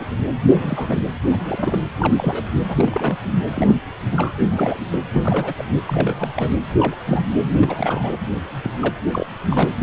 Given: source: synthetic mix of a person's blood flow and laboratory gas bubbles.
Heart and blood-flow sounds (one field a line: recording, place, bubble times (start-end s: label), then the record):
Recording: Doppler ultrasound of blood flow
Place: precordium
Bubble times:
0.00-0.05 s: bubbles
0.59-1.00 s: bubbles
1.27-1.78 s: bubbles
1.99-2.14 s: bubbles
2.17-2.45 s: bubbles
2.68-3.15 s: bubbles
3.55-3.76 s: bubbles
4.11-4.33 s: bubbles
4.40-4.80 s: bubbles
4.91-4.98 s: bubbles
5.09-5.54 s: bubbles
5.58-5.65 s: bubbles
5.87-6.52 s: bubbles
6.78-6.96 s: bubbles
7.06-7.23 s: bubbles
7.61-8.17 s: bubbles
8.63-8.70 s: bubbles
8.79-8.94 s: bubbles
9.11-9.26 s: bubbles
9.50-9.69 s: bubbles
9.79-9.83 s: bubbles
From the record:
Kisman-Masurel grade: 232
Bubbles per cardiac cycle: several, 3 to 8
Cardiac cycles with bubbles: 50 to 99%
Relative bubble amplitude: moderate (0.250 to 0.450)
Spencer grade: 3 (all of the cardiac periods contain showers or single bubble signals, but not dominating or overriding the cardiac motion signals)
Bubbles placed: anywhere in the cardiac cycle